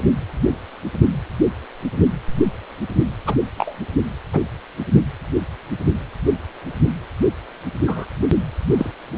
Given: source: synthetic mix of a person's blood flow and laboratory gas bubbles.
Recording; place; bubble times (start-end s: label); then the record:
Doppler ultrasound of blood flow; precordium
3.26-3.35 s: bubbles
3.57-3.75 s: bubbles
4.33-4.40 s: bubbles
7.86-8.05 s: bubbles
8.78-8.92 s: bubbles
From the record:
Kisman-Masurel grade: 122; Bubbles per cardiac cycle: 1 to 2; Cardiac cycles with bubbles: 10 to 50%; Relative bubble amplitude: moderate (0.250 to 0.450); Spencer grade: 2 (many but less than half of the cardiac periods contain bubble signals, singularly or in groups); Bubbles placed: only in the low amplitude regions of the cardiac cycle